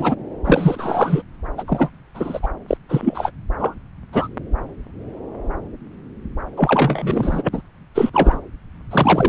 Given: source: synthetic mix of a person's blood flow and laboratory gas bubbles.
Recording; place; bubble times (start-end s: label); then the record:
Doppler ultrasound of blood flow; subclavian vein
0.00-0.15 s: bubbles
0.44-1.22 s: bubbles
1.57-1.64 s: bubbles
1.67-1.90 s: bubbles
2.14-2.48 s: bubbles
2.68-2.77 s: bubbles
2.88-3.31 s: bubbles
3.58-3.75 s: bubbles
4.12-4.28 s: bubbles
6.56-7.49 s: bubbles
7.52-7.61 s: bubbles
7.94-8.11 s: bubbles
8.13-8.41 s: bubbles
8.91-9.29 s: bubbles
From the record:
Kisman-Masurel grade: 233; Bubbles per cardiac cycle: several, 3 to 8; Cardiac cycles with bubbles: 50 to 99%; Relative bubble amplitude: loud (0.450 to 0.775); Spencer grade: 3 (all of the cardiac periods contain showers or single bubble signals, but not dominating or overriding the cardiac motion signals); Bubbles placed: anywhere in the cardiac cycle